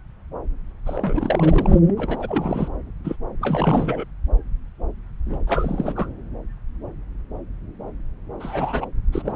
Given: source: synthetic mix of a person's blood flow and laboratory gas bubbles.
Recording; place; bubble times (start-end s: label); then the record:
Doppler ultrasound of blood flow; subclavian vein
0.86-1.79 s: bubbles
1.86-2.68 s: bubbles
3.04-3.17 s: bubbles
3.40-4.04 s: bubbles
5.27-5.38 s: bubbles
5.47-6.08 s: bubbles
8.39-8.87 s: bubbles
9.12-9.36 s: bubbles
From the record:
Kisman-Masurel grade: 332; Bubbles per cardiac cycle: rolling drumbeat, 9 or more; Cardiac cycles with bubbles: 50 to 99%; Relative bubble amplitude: moderate (0.250 to 0.450); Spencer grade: 3 (all of the cardiac periods contain showers or single bubble signals, but not dominating or overriding the cardiac motion signals); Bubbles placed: anywhere in the cardiac cycle